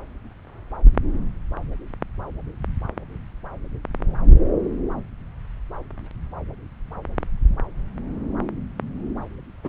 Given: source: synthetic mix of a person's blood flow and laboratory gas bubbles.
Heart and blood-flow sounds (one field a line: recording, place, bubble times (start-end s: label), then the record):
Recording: Doppler ultrasound of blood flow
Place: subclavian vein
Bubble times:
9.63-9.69 s: bubbles
From the record:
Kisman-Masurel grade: 112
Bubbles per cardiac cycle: 1 to 2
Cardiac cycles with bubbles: 1 to 10%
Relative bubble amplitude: moderate (0.250 to 0.450)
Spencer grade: 1 (occasional bubble signal discernible with the cardiac motion signal, with majority of cardiac periods free of bubbles)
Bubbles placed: anywhere in the cardiac cycle